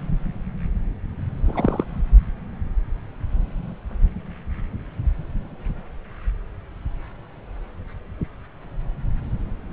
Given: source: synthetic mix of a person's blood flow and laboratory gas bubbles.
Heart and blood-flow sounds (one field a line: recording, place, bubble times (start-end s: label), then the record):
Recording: Doppler ultrasound of blood flow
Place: subclavian vein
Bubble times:
1.45-1.84 s: bubbles
From the record:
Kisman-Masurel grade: 112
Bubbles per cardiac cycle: 1 to 2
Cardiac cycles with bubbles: 1 to 10%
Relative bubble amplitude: moderate (0.250 to 0.450)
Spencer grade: 1 (occasional bubble signal discernible with the cardiac motion signal, with majority of cardiac periods free of bubbles)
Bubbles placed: anywhere in the cardiac cycle